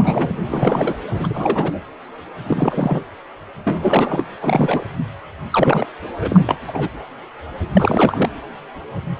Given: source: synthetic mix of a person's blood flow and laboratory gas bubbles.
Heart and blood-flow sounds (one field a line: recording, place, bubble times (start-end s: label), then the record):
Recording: Doppler ultrasound of blood flow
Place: precordium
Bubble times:
0.00-0.41 s: bubbles
0.48-0.98 s: bubbles
1.10-1.80 s: bubbles
2.46-3.02 s: bubbles
3.65-4.25 s: bubbles
4.42-4.85 s: bubbles
5.50-5.86 s: bubbles
6.21-6.58 s: bubbles
6.67-6.91 s: bubbles
7.74-8.29 s: bubbles
From the record:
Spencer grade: 3 (all of the cardiac periods contain showers or single bubble signals, but not dominating or overriding the cardiac motion signals)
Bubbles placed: anywhere in the cardiac cycle